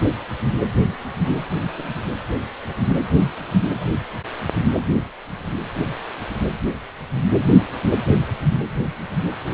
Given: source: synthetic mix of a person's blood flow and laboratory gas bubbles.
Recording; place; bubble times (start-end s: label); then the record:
Doppler ultrasound of blood flow; precordium
no bubbles
From the record:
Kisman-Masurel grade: 000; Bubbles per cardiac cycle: 0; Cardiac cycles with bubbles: 0%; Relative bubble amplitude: no bubbles discernible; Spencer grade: 0 (complete lack of bubble signals)